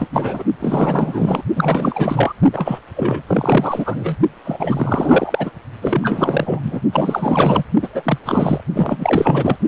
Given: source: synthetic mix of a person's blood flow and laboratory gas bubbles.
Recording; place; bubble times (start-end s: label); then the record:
Doppler ultrasound of blood flow; precordium
0.00-0.08 s: bubbles
0.12-0.43 s: bubbles
0.60-1.43 s: bubbles
1.56-2.33 s: bubbles
2.52-2.79 s: bubbles
2.96-3.23 s: bubbles
3.27-4.15 s: bubbles
4.44-5.50 s: bubbles
5.81-6.60 s: bubbles
6.62-6.81 s: bubbles
6.92-7.64 s: bubbles
7.82-7.88 s: bubbles
7.94-8.18 s: bubbles
8.25-8.62 s: bubbles
8.73-9.57 s: bubbles
From the record:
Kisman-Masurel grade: 444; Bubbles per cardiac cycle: continuous sound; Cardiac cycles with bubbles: 100%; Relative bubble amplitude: maximal (0.775 to 0.999); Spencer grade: 4 (maximum detectable bubble signal sounding continuously throughout systole and diastole of every cardiac period, and overriding the amplitude of the normal cardiac signals); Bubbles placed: only in the low amplitude regions of the cardiac cycle